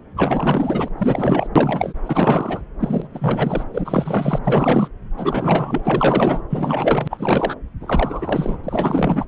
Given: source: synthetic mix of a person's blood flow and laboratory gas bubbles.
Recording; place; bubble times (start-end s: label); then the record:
Doppler ultrasound of blood flow; subclavian vein
0.16-0.89 s: bubbles
0.97-1.47 s: bubbles
1.55-1.94 s: bubbles
2.06-2.61 s: bubbles
2.79-3.08 s: bubbles
3.13-3.64 s: bubbles
3.73-4.38 s: bubbles
4.42-4.88 s: bubbles
5.17-6.42 s: bubbles
6.50-7.55 s: bubbles
7.80-8.59 s: bubbles
8.63-9.26 s: bubbles
From the record:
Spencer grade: 4 (maximum detectable bubble signal sounding continuously throughout systole and diastole of every cardiac period, and overriding the amplitude of the normal cardiac signals); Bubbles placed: anywhere in the cardiac cycle